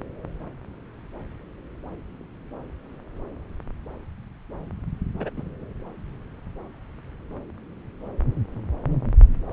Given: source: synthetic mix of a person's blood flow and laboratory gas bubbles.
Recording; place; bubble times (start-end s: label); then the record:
Doppler ultrasound of blood flow; subclavian vein
5.20-5.29 s: bubbles
5.37-5.43 s: bubbles
From the record:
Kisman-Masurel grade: 111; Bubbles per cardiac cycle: 1 to 2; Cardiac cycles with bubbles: 1 to 10%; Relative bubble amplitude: barely perceptible (0.100 to 0.250); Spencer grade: 1 (occasional bubble signal discernible with the cardiac motion signal, with majority of cardiac periods free of bubbles); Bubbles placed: anywhere in the cardiac cycle